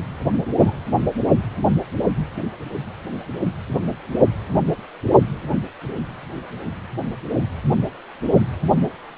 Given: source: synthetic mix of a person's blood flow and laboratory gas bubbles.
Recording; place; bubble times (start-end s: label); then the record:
Doppler ultrasound of blood flow; precordium
0.59-0.73 s: bubbles
From the record:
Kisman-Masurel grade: 112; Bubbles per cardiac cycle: 1 to 2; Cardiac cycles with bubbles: 1 to 10%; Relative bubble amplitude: moderate (0.250 to 0.450); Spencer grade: 1 (occasional bubble signal discernible with the cardiac motion signal, with majority of cardiac periods free of bubbles); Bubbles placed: only in the low amplitude regions of the cardiac cycle